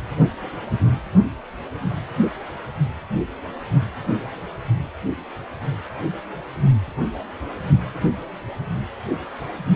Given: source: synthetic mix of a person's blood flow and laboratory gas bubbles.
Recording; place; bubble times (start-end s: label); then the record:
Doppler ultrasound of blood flow; precordium
no bubbles
From the record:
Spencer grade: 0 (complete lack of bubble signals)